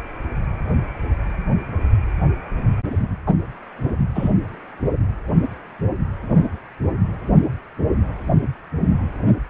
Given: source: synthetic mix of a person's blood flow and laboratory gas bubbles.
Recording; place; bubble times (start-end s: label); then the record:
Doppler ultrasound of blood flow; precordium
3.26-3.35 s: bubbles
4.15-4.31 s: bubbles
From the record:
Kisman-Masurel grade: 113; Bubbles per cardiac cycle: 1 to 2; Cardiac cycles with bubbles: 1 to 10%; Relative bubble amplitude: loud (0.450 to 0.775); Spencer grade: 1 (occasional bubble signal discernible with the cardiac motion signal, with majority of cardiac periods free of bubbles); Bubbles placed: anywhere in the cardiac cycle